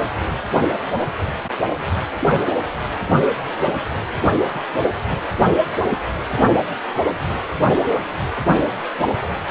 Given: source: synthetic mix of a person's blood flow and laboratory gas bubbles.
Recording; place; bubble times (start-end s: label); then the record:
Doppler ultrasound of blood flow; precordium
1.01-1.09 s: bubbles
6.40-6.44 s: bubbles
From the record:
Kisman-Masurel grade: 121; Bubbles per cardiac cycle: 1 to 2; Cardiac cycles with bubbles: 10 to 50%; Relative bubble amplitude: barely perceptible (0.100 to 0.250); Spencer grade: 2 (many but less than half of the cardiac periods contain bubble signals, singularly or in groups); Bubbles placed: anywhere in the cardiac cycle